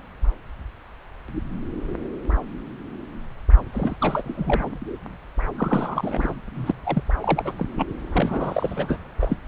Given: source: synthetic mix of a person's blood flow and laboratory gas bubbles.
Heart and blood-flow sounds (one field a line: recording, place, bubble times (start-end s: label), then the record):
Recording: Doppler ultrasound of blood flow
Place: subclavian vein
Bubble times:
3.73-3.96 s: bubbles
4.00-4.79 s: bubbles
5.58-6.34 s: bubbles
6.54-6.71 s: bubbles
6.84-7.03 s: bubbles
7.21-7.53 s: bubbles
7.58-7.66 s: bubbles
7.77-7.85 s: bubbles
8.12-8.96 s: bubbles
9.21-9.37 s: bubbles
From the record:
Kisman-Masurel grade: 332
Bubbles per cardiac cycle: rolling drumbeat, 9 or more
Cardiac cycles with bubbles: 50 to 99%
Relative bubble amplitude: moderate (0.250 to 0.450)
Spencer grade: 3 (all of the cardiac periods contain showers or single bubble signals, but not dominating or overriding the cardiac motion signals)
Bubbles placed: anywhere in the cardiac cycle